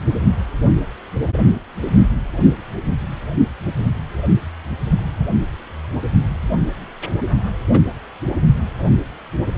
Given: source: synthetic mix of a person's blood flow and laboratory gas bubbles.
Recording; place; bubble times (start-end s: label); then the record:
Doppler ultrasound of blood flow; precordium
7.74-7.82 s: bubbles
From the record:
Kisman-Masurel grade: 123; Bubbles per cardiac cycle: 1 to 2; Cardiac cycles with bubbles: 10 to 50%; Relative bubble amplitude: loud (0.450 to 0.775); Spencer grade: 2 (many but less than half of the cardiac periods contain bubble signals, singularly or in groups); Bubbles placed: only in the low amplitude regions of the cardiac cycle